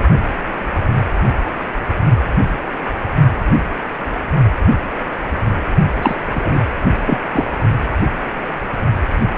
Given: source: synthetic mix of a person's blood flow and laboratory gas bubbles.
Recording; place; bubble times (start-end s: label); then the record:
Doppler ultrasound of blood flow; precordium
6.02-6.16 s: bubbles
6.35-6.63 s: bubbles
7.05-7.19 s: bubbles
7.33-7.46 s: bubbles
From the record:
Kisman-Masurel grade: 223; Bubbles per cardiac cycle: several, 3 to 8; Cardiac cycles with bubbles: 10 to 50%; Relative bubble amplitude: loud (0.450 to 0.775); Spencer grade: 2 (many but less than half of the cardiac periods contain bubble signals, singularly or in groups); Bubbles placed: only in the low amplitude regions of the cardiac cycle